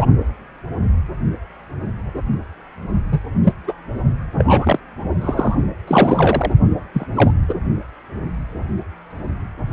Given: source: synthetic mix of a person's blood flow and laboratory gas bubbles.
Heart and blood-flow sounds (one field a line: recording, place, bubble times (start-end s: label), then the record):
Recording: Doppler ultrasound of blood flow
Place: precordium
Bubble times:
0.00-0.06 s: bubbles
3.12-3.19 s: bubbles
3.44-3.53 s: bubbles
3.67-3.73 s: bubbles
4.38-4.79 s: bubbles
5.21-5.55 s: bubbles
5.87-6.52 s: bubbles
6.93-7.06 s: bubbles
7.15-7.31 s: bubbles
7.48-7.54 s: bubbles
From the record:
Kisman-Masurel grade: 233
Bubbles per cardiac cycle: several, 3 to 8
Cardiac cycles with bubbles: 50 to 99%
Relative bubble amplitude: loud (0.450 to 0.775)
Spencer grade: 3 (all of the cardiac periods contain showers or single bubble signals, but not dominating or overriding the cardiac motion signals)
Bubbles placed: only in the low amplitude regions of the cardiac cycle